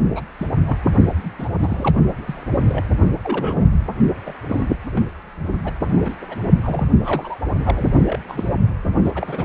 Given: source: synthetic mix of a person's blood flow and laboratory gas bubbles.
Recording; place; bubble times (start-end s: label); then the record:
Doppler ultrasound of blood flow; precordium
0.15-0.22 s: bubbles
0.38-0.47 s: bubbles
0.66-0.77 s: bubbles
1.24-1.30 s: bubbles
1.39-1.48 s: bubbles
1.59-1.95 s: bubbles
2.27-2.44 s: bubbles
2.51-2.65 s: bubbles
2.69-2.85 s: bubbles
3.23-3.65 s: bubbles
4.25-4.34 s: bubbles
4.49-4.67 s: bubbles
4.91-5.10 s: bubbles
5.65-5.73 s: bubbles
5.84-6.15 s: bubbles
6.21-6.26 s: bubbles
6.29-6.36 s: bubbles
6.43-6.49 s: bubbles
6.61-6.88 s: bubbles
6.99-7.38 s: bubbles
7.64-7.89 s: bubbles
8.07-8.19 s: bubbles
8.27-8.50 s: bubbles
9.04-9.12 s: bubbles
9.15-9.45 s: bubbles
From the record:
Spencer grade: 3 (all of the cardiac periods contain showers or single bubble signals, but not dominating or overriding the cardiac motion signals); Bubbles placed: only in the low amplitude regions of the cardiac cycle